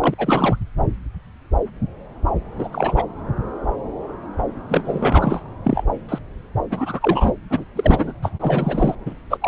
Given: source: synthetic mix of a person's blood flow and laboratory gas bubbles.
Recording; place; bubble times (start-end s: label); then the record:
Doppler ultrasound of blood flow; subclavian vein
0.00-0.14 s: bubbles
0.18-0.56 s: bubbles
2.58-2.69 s: bubbles
2.71-3.04 s: bubbles
4.68-5.42 s: bubbles
5.64-5.84 s: bubbles
6.08-6.18 s: bubbles
6.70-7.32 s: bubbles
7.50-7.64 s: bubbles
7.76-8.12 s: bubbles
8.22-8.30 s: bubbles
8.39-8.95 s: bubbles
9.05-9.14 s: bubbles
9.30-9.38 s: bubbles
9.40-9.48 s: bubbles
From the record:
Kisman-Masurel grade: 233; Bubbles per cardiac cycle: several, 3 to 8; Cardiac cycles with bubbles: 50 to 99%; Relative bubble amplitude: loud (0.450 to 0.775); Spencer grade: 3 (all of the cardiac periods contain showers or single bubble signals, but not dominating or overriding the cardiac motion signals); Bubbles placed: anywhere in the cardiac cycle